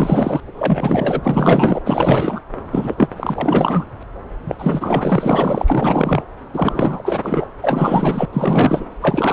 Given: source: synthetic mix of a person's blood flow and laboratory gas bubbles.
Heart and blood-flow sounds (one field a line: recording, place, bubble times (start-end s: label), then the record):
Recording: Doppler ultrasound of blood flow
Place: subclavian vein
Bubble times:
0.00-0.40 s: bubbles
0.55-1.82 s: bubbles
1.86-2.40 s: bubbles
2.71-3.08 s: bubbles
3.16-3.85 s: bubbles
4.46-4.55 s: bubbles
4.58-6.23 s: bubbles
6.53-7.46 s: bubbles
7.62-8.26 s: bubbles
8.33-8.85 s: bubbles
9.00-9.33 s: bubbles
From the record:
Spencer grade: 4 (maximum detectable bubble signal sounding continuously throughout systole and diastole of every cardiac period, and overriding the amplitude of the normal cardiac signals)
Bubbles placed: anywhere in the cardiac cycle